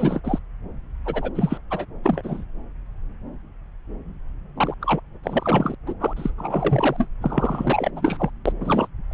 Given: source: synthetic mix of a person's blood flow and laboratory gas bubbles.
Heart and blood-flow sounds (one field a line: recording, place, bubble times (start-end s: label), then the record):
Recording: Doppler ultrasound of blood flow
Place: subclavian vein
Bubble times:
0.00-0.20 s: bubbles
0.23-0.39 s: bubbles
1.05-1.30 s: bubbles
1.35-1.58 s: bubbles
1.71-1.85 s: bubbles
2.04-2.46 s: bubbles
4.56-4.74 s: bubbles
4.81-5.00 s: bubbles
5.23-5.75 s: bubbles
5.87-5.94 s: bubbles
6.01-6.13 s: bubbles
6.16-6.30 s: bubbles
6.38-7.07 s: bubbles
7.22-7.91 s: bubbles
7.96-8.30 s: bubbles
8.46-8.53 s: bubbles
8.60-8.88 s: bubbles
9.11-9.14 s: bubbles
From the record:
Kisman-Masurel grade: 332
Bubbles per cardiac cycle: rolling drumbeat, 9 or more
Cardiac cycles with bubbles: 50 to 99%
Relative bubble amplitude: moderate (0.250 to 0.450)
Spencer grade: 3 (all of the cardiac periods contain showers or single bubble signals, but not dominating or overriding the cardiac motion signals)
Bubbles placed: anywhere in the cardiac cycle